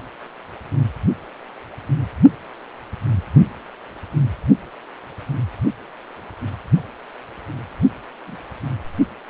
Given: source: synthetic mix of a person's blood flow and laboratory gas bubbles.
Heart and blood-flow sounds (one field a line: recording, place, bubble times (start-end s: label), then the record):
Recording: Doppler ultrasound of blood flow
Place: precordium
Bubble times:
8.27-8.37 s: bubbles
From the record:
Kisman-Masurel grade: 111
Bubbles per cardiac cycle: 1 to 2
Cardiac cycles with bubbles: 1 to 10%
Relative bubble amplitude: barely perceptible (0.100 to 0.250)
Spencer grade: 1 (occasional bubble signal discernible with the cardiac motion signal, with majority of cardiac periods free of bubbles)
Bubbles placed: only in the low amplitude regions of the cardiac cycle